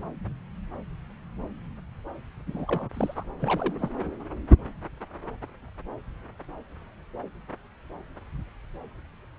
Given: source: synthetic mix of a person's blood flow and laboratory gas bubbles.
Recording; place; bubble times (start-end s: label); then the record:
Doppler ultrasound of blood flow; subclavian vein
2.46-2.89 s: bubbles
2.93-3.24 s: bubbles
3.39-3.90 s: bubbles
From the record:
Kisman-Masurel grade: 211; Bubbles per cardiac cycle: several, 3 to 8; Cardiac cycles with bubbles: 1 to 10%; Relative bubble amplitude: barely perceptible (0.100 to 0.250); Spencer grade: 1 (occasional bubble signal discernible with the cardiac motion signal, with majority of cardiac periods free of bubbles); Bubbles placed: anywhere in the cardiac cycle